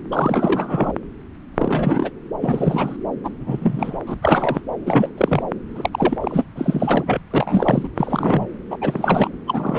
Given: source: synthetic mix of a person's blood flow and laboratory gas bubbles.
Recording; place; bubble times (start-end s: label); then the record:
Doppler ultrasound of blood flow; subclavian vein
0.11-0.92 s: bubbles
1.55-2.10 s: bubbles
2.42-2.97 s: bubbles
3.24-3.29 s: bubbles
3.40-3.98 s: bubbles
4.06-4.14 s: bubbles
4.22-4.61 s: bubbles
4.85-5.09 s: bubbles
5.17-5.43 s: bubbles
5.75-5.90 s: bubbles
5.92-6.17 s: bubbles
6.21-6.44 s: bubbles
6.55-7.21 s: bubbles
7.30-7.88 s: bubbles
7.96-8.46 s: bubbles
8.70-8.77 s: bubbles
8.81-9.30 s: bubbles
9.47-9.79 s: bubbles
From the record:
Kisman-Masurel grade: 332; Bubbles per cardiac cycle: rolling drumbeat, 9 or more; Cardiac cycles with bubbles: 50 to 99%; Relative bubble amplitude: moderate (0.250 to 0.450); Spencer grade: 3 (all of the cardiac periods contain showers or single bubble signals, but not dominating or overriding the cardiac motion signals); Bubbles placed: anywhere in the cardiac cycle